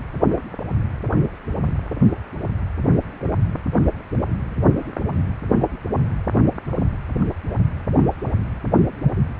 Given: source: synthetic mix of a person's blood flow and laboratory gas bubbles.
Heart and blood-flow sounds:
Doppler ultrasound of blood flow; precordium
no bubbles
From the record:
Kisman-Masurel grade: 000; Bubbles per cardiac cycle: 0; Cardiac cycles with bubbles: 0%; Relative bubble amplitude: no bubbles discernible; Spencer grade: 0 (complete lack of bubble signals)

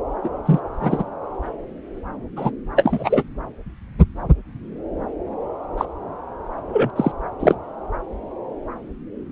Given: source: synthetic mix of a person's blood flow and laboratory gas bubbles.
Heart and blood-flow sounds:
Doppler ultrasound of blood flow; subclavian vein
0.23-0.29 s: bubbles
0.45-0.60 s: bubbles
0.79-1.03 s: bubbles
2.37-2.51 s: bubbles
2.76-3.24 s: bubbles
5.77-5.85 s: bubbles
6.72-6.90 s: bubbles
6.96-7.12 s: bubbles
7.39-7.55 s: bubbles
From the record:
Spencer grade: 2 (many but less than half of the cardiac periods contain bubble signals, singularly or in groups); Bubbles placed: anywhere in the cardiac cycle

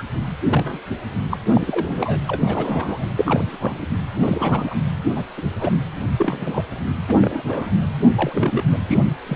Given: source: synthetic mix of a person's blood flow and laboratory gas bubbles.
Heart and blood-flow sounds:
Doppler ultrasound of blood flow; precordium
0.00-0.03 s: bubbles
0.48-0.81 s: bubbles
1.31-1.38 s: bubbles
1.54-2.19 s: bubbles
2.27-3.06 s: bubbles
3.17-3.57 s: bubbles
3.59-3.87 s: bubbles
4.19-4.75 s: bubbles
5.16-5.24 s: bubbles
5.37-5.42 s: bubbles
5.56-5.73 s: bubbles
6.18-6.62 s: bubbles
7.07-7.18 s: bubbles
7.21-7.71 s: bubbles
8.13-8.64 s: bubbles
8.71-8.78 s: bubbles
8.87-8.98 s: bubbles
9.26-9.36 s: bubbles
From the record:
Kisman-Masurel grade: 242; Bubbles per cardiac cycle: several, 3 to 8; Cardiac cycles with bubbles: 100%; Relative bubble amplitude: moderate (0.250 to 0.450); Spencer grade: 3 (all of the cardiac periods contain showers or single bubble signals, but not dominating or overriding the cardiac motion signals); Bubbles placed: anywhere in the cardiac cycle

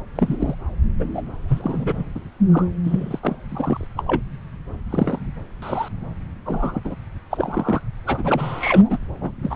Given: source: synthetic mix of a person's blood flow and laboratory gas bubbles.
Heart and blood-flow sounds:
Doppler ultrasound of blood flow; subclavian vein
0.15-0.37 s: bubbles
0.39-0.55 s: bubbles
0.99-1.05 s: bubbles
1.14-1.22 s: bubbles
1.48-2.04 s: bubbles
2.15-2.20 s: bubbles
2.48-2.65 s: bubbles
2.83-3.19 s: bubbles
3.23-3.36 s: bubbles
3.48-3.87 s: bubbles
3.97-4.03 s: bubbles
4.06-4.22 s: bubbles
4.90-5.19 s: bubbles
5.62-5.88 s: bubbles
6.46-6.80 s: bubbles
6.84-6.95 s: bubbles
7.30-7.81 s: bubbles
8.06-8.98 s: bubbles
9.16-9.38 s: bubbles
9.42-9.56 s: bubbles
From the record:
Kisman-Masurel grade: 242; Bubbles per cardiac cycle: several, 3 to 8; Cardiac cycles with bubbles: 100%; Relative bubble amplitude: moderate (0.250 to 0.450); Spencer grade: 3 (all of the cardiac periods contain showers or single bubble signals, but not dominating or overriding the cardiac motion signals); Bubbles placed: anywhere in the cardiac cycle

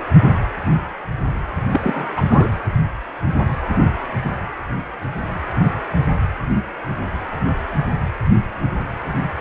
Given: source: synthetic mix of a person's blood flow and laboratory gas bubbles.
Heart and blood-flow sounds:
Doppler ultrasound of blood flow; precordium
1.71-1.81 s: bubbles
1.83-2.14 s: bubbles
2.16-2.26 s: bubbles
2.29-2.50 s: bubbles
From the record:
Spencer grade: 1 (occasional bubble signal discernible with the cardiac motion signal, with majority of cardiac periods free of bubbles); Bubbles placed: anywhere in the cardiac cycle

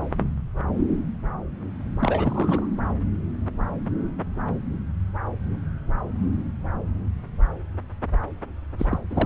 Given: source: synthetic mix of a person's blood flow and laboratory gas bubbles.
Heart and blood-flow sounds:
Doppler ultrasound of blood flow; subclavian vein
2.00-2.66 s: bubbles
8.79-8.86 s: bubbles
8.90-8.98 s: bubbles
9.10-9.26 s: bubbles
From the record:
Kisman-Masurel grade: 221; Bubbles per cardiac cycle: several, 3 to 8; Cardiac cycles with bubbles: 10 to 50%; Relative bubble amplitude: barely perceptible (0.100 to 0.250); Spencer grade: 2 (many but less than half of the cardiac periods contain bubble signals, singularly or in groups); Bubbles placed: anywhere in the cardiac cycle

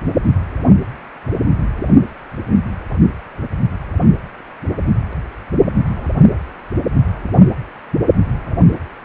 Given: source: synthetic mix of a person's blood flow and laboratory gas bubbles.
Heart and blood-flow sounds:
Doppler ultrasound of blood flow; precordium
no bubbles
From the record:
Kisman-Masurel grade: 000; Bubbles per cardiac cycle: 0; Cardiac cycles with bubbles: 0%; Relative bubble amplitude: no bubbles discernible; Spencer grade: 0 (complete lack of bubble signals)

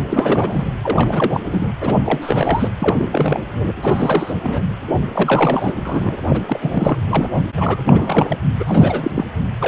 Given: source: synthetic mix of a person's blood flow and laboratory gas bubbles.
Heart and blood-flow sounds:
Doppler ultrasound of blood flow; precordium
0.09-0.64 s: bubbles
0.83-1.41 s: bubbles
1.51-1.67 s: bubbles
1.81-1.98 s: bubbles
2.06-2.69 s: bubbles
2.80-3.09 s: bubbles
3.12-3.44 s: bubbles
3.82-4.34 s: bubbles
4.44-4.63 s: bubbles
5.14-5.73 s: bubbles
5.85-6.17 s: bubbles
6.29-6.41 s: bubbles
6.46-6.98 s: bubbles
7.10-7.29 s: bubbles
7.35-7.44 s: bubbles
7.57-7.82 s: bubbles
7.87-8.39 s: bubbles
8.59-9.11 s: bubbles
9.15-9.24 s: bubbles
9.59-9.68 s: bubbles
From the record:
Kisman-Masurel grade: 342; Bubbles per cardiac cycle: rolling drumbeat, 9 or more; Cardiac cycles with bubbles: 100%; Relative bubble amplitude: moderate (0.250 to 0.450); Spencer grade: 3 (all of the cardiac periods contain showers or single bubble signals, but not dominating or overriding the cardiac motion signals); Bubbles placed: anywhere in the cardiac cycle

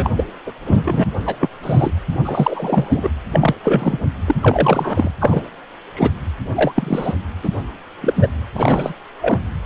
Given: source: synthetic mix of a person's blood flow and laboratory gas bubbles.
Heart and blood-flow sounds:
Doppler ultrasound of blood flow; precordium
0.00-0.10 s: bubbles
0.16-0.24 s: bubbles
0.46-0.52 s: bubbles
0.66-1.04 s: bubbles
1.25-1.35 s: bubbles
1.40-1.49 s: bubbles
1.62-1.92 s: bubbles
2.25-3.10 s: bubbles
3.32-3.54 s: bubbles
3.63-3.98 s: bubbles
4.27-4.36 s: bubbles
4.41-5.11 s: bubbles
5.20-5.42 s: bubbles
5.94-6.10 s: bubbles
6.55-6.72 s: bubbles
6.76-7.14 s: bubbles
7.43-7.50 s: bubbles
8.01-8.27 s: bubbles
8.54-8.93 s: bubbles
9.21-9.39 s: bubbles
From the record:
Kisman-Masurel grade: 243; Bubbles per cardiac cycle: several, 3 to 8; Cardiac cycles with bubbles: 100%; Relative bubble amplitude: loud (0.450 to 0.775); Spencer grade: 3 (all of the cardiac periods contain showers or single bubble signals, but not dominating or overriding the cardiac motion signals); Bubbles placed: anywhere in the cardiac cycle

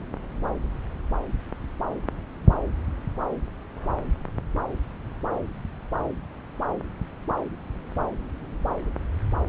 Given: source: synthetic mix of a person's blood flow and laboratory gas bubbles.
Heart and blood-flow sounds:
Doppler ultrasound of blood flow; subclavian vein
no bubbles
From the record:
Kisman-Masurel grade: 000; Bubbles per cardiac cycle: 0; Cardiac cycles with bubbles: 0%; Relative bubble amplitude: no bubbles discernible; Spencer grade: 0 (complete lack of bubble signals)

